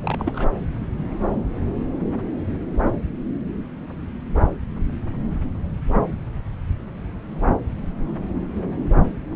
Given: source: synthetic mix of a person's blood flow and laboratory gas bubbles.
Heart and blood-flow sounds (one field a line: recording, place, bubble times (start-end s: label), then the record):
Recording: Doppler ultrasound of blood flow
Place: subclavian vein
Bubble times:
0.02-0.48 s: bubbles
From the record:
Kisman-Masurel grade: 211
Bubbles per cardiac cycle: several, 3 to 8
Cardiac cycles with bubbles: 1 to 10%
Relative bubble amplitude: barely perceptible (0.100 to 0.250)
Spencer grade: 1 (occasional bubble signal discernible with the cardiac motion signal, with majority of cardiac periods free of bubbles)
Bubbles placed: anywhere in the cardiac cycle